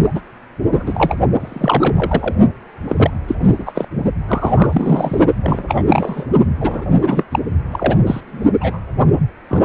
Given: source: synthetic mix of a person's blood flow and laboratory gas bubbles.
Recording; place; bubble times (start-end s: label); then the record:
Doppler ultrasound of blood flow; precordium
0.15-0.21 s: bubbles
0.63-1.17 s: bubbles
1.39-2.35 s: bubbles
2.87-3.10 s: bubbles
3.27-3.35 s: bubbles
3.40-3.86 s: bubbles
4.27-5.27 s: bubbles
5.42-5.83 s: bubbles
5.87-6.26 s: bubbles
6.60-6.86 s: bubbles
7.01-7.24 s: bubbles
7.31-7.39 s: bubbles
7.71-7.96 s: bubbles
8.06-8.21 s: bubbles
8.27-8.51 s: bubbles
8.60-8.78 s: bubbles
9.49-9.65 s: bubbles
From the record:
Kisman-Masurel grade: 243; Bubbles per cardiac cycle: several, 3 to 8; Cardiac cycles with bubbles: 100%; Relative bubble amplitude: loud (0.450 to 0.775); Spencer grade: 3 (all of the cardiac periods contain showers or single bubble signals, but not dominating or overriding the cardiac motion signals); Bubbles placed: only in the low amplitude regions of the cardiac cycle